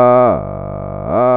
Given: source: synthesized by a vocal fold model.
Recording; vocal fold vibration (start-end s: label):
sustained vowel that changes in the middle
0.00-0.23 s: 124.8 Hz, open quotient 0.31
0.43-1.03 s: 48.7 Hz, open quotient 0.29
1.23-1.37 s: 124.8 Hz, open quotient 0.31